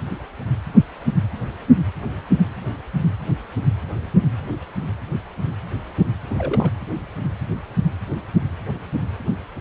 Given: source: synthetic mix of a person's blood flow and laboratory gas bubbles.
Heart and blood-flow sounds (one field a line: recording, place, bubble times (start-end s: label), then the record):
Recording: Doppler ultrasound of blood flow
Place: precordium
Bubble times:
6.29-6.70 s: bubbles
From the record:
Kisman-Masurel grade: 211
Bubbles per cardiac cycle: several, 3 to 8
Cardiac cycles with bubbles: 1 to 10%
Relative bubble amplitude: barely perceptible (0.100 to 0.250)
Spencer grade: 1 (occasional bubble signal discernible with the cardiac motion signal, with majority of cardiac periods free of bubbles)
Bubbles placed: anywhere in the cardiac cycle